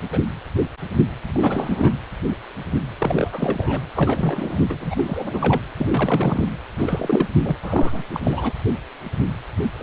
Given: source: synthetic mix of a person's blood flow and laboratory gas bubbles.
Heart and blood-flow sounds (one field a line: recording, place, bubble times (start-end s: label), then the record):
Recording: Doppler ultrasound of blood flow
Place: precordium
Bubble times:
0.11-0.19 s: bubbles
1.27-1.97 s: bubbles
2.99-3.81 s: bubbles
3.96-4.65 s: bubbles
4.69-4.76 s: bubbles
4.80-5.60 s: bubbles
5.76-6.47 s: bubbles
6.77-7.29 s: bubbles
7.42-7.56 s: bubbles
7.62-8.04 s: bubbles
8.13-8.53 s: bubbles
9.58-9.62 s: bubbles
9.79-9.83 s: bubbles
From the record:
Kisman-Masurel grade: 332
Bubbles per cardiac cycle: rolling drumbeat, 9 or more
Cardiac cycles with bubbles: 50 to 99%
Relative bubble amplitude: moderate (0.250 to 0.450)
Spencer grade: 3 (all of the cardiac periods contain showers or single bubble signals, but not dominating or overriding the cardiac motion signals)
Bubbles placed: anywhere in the cardiac cycle